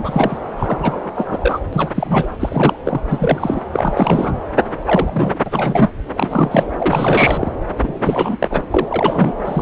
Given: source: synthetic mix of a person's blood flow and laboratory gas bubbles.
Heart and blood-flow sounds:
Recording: Doppler ultrasound of blood flow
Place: subclavian vein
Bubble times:
0.00-0.39 s: bubbles
0.56-1.10 s: bubbles
1.15-1.59 s: bubbles
1.73-1.90 s: bubbles
1.95-2.28 s: bubbles
2.40-2.80 s: bubbles
2.83-3.01 s: bubbles
3.09-3.60 s: bubbles
3.71-4.34 s: bubbles
4.75-5.39 s: bubbles
5.46-5.89 s: bubbles
6.14-6.67 s: bubbles
6.79-7.52 s: bubbles
7.77-8.37 s: bubbles
8.39-8.61 s: bubbles
8.71-9.32 s: bubbles
9.41-9.62 s: bubbles
From the record:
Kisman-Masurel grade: 343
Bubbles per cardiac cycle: rolling drumbeat, 9 or more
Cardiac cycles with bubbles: 100%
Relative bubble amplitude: loud (0.450 to 0.775)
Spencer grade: 3 (all of the cardiac periods contain showers or single bubble signals, but not dominating or overriding the cardiac motion signals)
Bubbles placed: anywhere in the cardiac cycle

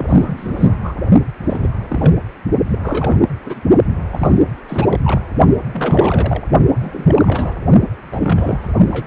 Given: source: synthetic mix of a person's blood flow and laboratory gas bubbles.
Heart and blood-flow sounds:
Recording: Doppler ultrasound of blood flow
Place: precordium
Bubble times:
0.00-0.06 s: bubbles
0.08-0.77 s: bubbles
0.83-0.94 s: bubbles
1.46-1.70 s: bubbles
1.90-2.14 s: bubbles
2.71-2.79 s: bubbles
2.82-3.25 s: bubbles
3.45-3.61 s: bubbles
4.12-4.41 s: bubbles
4.69-4.99 s: bubbles
5.03-5.21 s: bubbles
5.71-6.43 s: bubbles
6.79-7.54 s: bubbles
8.12-8.73 s: bubbles
8.77-9.07 s: bubbles
From the record:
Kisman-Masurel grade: 342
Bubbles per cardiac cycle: rolling drumbeat, 9 or more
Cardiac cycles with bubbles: 100%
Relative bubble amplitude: moderate (0.250 to 0.450)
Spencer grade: 3 (all of the cardiac periods contain showers or single bubble signals, but not dominating or overriding the cardiac motion signals)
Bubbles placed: only in the low amplitude regions of the cardiac cycle

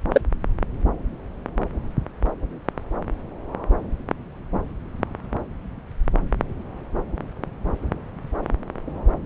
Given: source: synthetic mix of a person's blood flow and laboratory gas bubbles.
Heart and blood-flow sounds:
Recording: Doppler ultrasound of blood flow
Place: subclavian vein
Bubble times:
0.12-0.21 s: bubbles
From the record:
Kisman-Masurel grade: 122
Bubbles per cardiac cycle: 1 to 2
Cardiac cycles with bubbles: 10 to 50%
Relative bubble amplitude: moderate (0.250 to 0.450)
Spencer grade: 2 (many but less than half of the cardiac periods contain bubble signals, singularly or in groups)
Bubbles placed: anywhere in the cardiac cycle

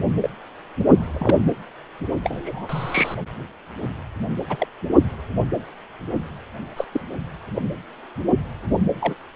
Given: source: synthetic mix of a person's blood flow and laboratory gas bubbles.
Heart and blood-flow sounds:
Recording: Doppler ultrasound of blood flow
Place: precordium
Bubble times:
0.20-0.30 s: bubbles
0.92-1.43 s: bubbles
2.24-3.15 s: bubbles
4.49-4.67 s: bubbles
6.77-6.85 s: bubbles
6.92-7.01 s: bubbles
7.54-7.62 s: bubbles
9.01-9.16 s: bubbles
From the record:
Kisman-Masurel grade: 122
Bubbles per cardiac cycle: 1 to 2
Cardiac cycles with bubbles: 10 to 50%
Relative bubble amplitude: moderate (0.250 to 0.450)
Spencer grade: 2 (many but less than half of the cardiac periods contain bubble signals, singularly or in groups)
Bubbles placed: anywhere in the cardiac cycle

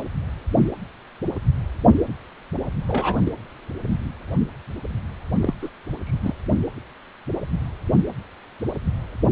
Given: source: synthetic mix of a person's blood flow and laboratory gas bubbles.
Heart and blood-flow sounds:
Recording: Doppler ultrasound of blood flow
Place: precordium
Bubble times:
2.88-3.32 s: bubbles
5.40-5.54 s: bubbles
5.61-5.69 s: bubbles
6.06-6.34 s: bubbles
From the record:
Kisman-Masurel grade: 212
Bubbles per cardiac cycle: several, 3 to 8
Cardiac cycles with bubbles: 1 to 10%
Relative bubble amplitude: moderate (0.250 to 0.450)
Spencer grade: 1 (occasional bubble signal discernible with the cardiac motion signal, with majority of cardiac periods free of bubbles)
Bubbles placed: anywhere in the cardiac cycle

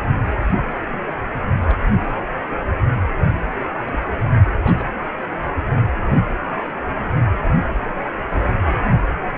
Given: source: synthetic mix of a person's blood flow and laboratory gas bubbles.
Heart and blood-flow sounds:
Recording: Doppler ultrasound of blood flow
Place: precordium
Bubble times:
0.61-0.69 s: bubbles
1.65-1.79 s: bubbles
3.86-3.99 s: bubbles
4.63-4.89 s: bubbles
8.63-8.78 s: bubbles
8.84-8.89 s: bubbles
9.26-9.31 s: bubbles
From the record:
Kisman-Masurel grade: 121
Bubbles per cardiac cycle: 1 to 2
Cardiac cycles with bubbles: 10 to 50%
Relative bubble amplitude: barely perceptible (0.100 to 0.250)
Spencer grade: 2 (many but less than half of the cardiac periods contain bubble signals, singularly or in groups)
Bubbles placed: anywhere in the cardiac cycle

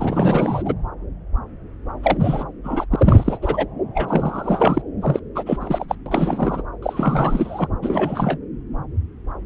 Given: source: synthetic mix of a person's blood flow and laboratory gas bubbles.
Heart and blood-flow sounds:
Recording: Doppler ultrasound of blood flow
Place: subclavian vein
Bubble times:
0.00-0.62 s: bubbles
0.65-0.73 s: bubbles
2.03-2.44 s: bubbles
2.64-2.86 s: bubbles
2.91-3.39 s: bubbles
3.42-3.66 s: bubbles
3.95-4.82 s: bubbles
5.03-5.20 s: bubbles
5.35-5.58 s: bubbles
5.60-5.86 s: bubbles
5.88-5.96 s: bubbles
6.06-6.62 s: bubbles
6.82-7.67 s: bubbles
7.82-8.38 s: bubbles
From the record:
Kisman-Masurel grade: 332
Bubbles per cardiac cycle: rolling drumbeat, 9 or more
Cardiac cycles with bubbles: 50 to 99%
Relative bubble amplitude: moderate (0.250 to 0.450)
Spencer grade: 3 (all of the cardiac periods contain showers or single bubble signals, but not dominating or overriding the cardiac motion signals)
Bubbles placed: anywhere in the cardiac cycle

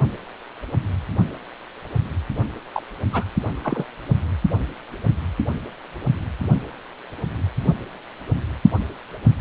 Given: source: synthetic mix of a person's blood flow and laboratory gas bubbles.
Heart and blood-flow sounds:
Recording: Doppler ultrasound of blood flow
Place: precordium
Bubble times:
2.73-2.83 s: bubbles
3.12-3.24 s: bubbles
3.63-3.84 s: bubbles
From the record:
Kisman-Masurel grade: 122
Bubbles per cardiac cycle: 1 to 2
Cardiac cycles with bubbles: 10 to 50%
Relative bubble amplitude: moderate (0.250 to 0.450)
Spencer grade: 2 (many but less than half of the cardiac periods contain bubble signals, singularly or in groups)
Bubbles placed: only in the low amplitude regions of the cardiac cycle

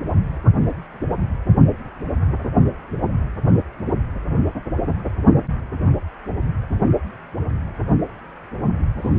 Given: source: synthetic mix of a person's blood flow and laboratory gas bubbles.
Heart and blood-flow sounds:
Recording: Doppler ultrasound of blood flow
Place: precordium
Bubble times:
8.97-9.19 s: bubbles
From the record:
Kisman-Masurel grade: 211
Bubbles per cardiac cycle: several, 3 to 8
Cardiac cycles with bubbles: 1 to 10%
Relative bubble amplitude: barely perceptible (0.100 to 0.250)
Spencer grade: 1 (occasional bubble signal discernible with the cardiac motion signal, with majority of cardiac periods free of bubbles)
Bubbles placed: anywhere in the cardiac cycle

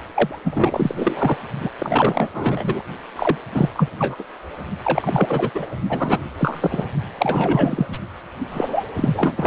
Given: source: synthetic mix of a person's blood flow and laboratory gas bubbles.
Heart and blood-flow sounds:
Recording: Doppler ultrasound of blood flow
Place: precordium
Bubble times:
0.12-0.40 s: bubbles
0.44-1.37 s: bubbles
1.60-1.69 s: bubbles
1.78-2.27 s: bubbles
2.33-2.82 s: bubbles
3.15-3.37 s: bubbles
3.54-3.69 s: bubbles
3.74-3.88 s: bubbles
3.99-4.15 s: bubbles
4.19-4.23 s: bubbles
4.84-5.50 s: bubbles
5.54-5.67 s: bubbles
5.90-6.20 s: bubbles
6.38-6.84 s: bubbles
7.19-7.87 s: bubbles
7.92-7.99 s: bubbles
8.51-8.84 s: bubbles
8.96-9.47 s: bubbles
From the record:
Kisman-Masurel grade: 342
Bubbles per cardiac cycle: rolling drumbeat, 9 or more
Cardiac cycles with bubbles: 100%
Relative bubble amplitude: moderate (0.250 to 0.450)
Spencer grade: 3 (all of the cardiac periods contain showers or single bubble signals, but not dominating or overriding the cardiac motion signals)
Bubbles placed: only in the low amplitude regions of the cardiac cycle

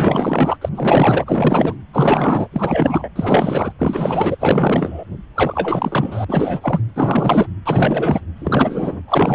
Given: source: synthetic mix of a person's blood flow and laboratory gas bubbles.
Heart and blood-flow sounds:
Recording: Doppler ultrasound of blood flow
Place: precordium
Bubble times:
0.00-0.57 s: bubbles
0.61-0.69 s: bubbles
0.75-1.77 s: bubbles
1.92-2.48 s: bubbles
2.53-3.08 s: bubbles
3.15-3.72 s: bubbles
3.79-4.37 s: bubbles
4.39-5.04 s: bubbles
5.34-6.25 s: bubbles
6.28-6.83 s: bubbles
6.96-7.46 s: bubbles
7.66-8.21 s: bubbles
8.37-9.02 s: bubbles
9.07-9.35 s: bubbles
From the record:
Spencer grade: 4 (maximum detectable bubble signal sounding continuously throughout systole and diastole of every cardiac period, and overriding the amplitude of the normal cardiac signals)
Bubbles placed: anywhere in the cardiac cycle

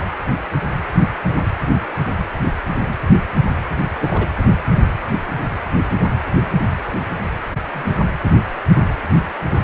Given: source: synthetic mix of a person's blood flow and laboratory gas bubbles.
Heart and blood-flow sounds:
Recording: Doppler ultrasound of blood flow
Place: precordium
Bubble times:
0.00-0.05 s: bubbles
3.99-4.27 s: bubbles
7.73-7.92 s: bubbles
From the record:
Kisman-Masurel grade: 122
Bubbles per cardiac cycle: 1 to 2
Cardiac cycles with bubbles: 10 to 50%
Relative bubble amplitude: moderate (0.250 to 0.450)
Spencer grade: 2 (many but less than half of the cardiac periods contain bubble signals, singularly or in groups)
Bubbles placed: anywhere in the cardiac cycle

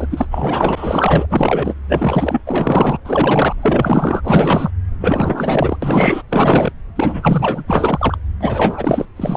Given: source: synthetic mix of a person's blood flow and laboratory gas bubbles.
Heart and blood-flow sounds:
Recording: Doppler ultrasound of blood flow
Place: subclavian vein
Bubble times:
0.00-0.07 s: bubbles
0.10-0.27 s: bubbles
0.30-1.26 s: bubbles
1.30-1.75 s: bubbles
1.88-2.41 s: bubbles
2.46-2.98 s: bubbles
3.04-3.56 s: bubbles
3.62-4.70 s: bubbles
4.99-5.76 s: bubbles
5.82-6.22 s: bubbles
6.29-6.72 s: bubbles
6.96-7.63 s: bubbles
7.67-8.17 s: bubbles
8.40-9.05 s: bubbles
9.16-9.37 s: bubbles
From the record:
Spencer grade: 4 (maximum detectable bubble signal sounding continuously throughout systole and diastole of every cardiac period, and overriding the amplitude of the normal cardiac signals)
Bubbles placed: anywhere in the cardiac cycle

